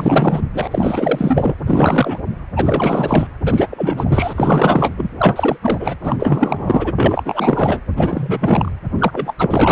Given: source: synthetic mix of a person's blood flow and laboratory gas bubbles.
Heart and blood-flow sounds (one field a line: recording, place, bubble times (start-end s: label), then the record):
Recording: Doppler ultrasound of blood flow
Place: precordium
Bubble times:
0.00-0.42 s: bubbles
0.54-0.67 s: bubbles
0.70-1.54 s: bubbles
1.66-2.17 s: bubbles
2.55-3.27 s: bubbles
3.44-4.95 s: bubbles
4.97-5.10 s: bubbles
5.18-5.57 s: bubbles
5.62-5.97 s: bubbles
6.03-6.93 s: bubbles
6.96-7.80 s: bubbles
7.97-8.72 s: bubbles
8.98-9.33 s: bubbles
9.38-9.72 s: bubbles
From the record:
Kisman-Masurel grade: 444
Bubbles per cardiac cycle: continuous sound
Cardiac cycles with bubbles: 100%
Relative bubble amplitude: maximal (0.775 to 0.999)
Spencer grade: 4 (maximum detectable bubble signal sounding continuously throughout systole and diastole of every cardiac period, and overriding the amplitude of the normal cardiac signals)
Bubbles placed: anywhere in the cardiac cycle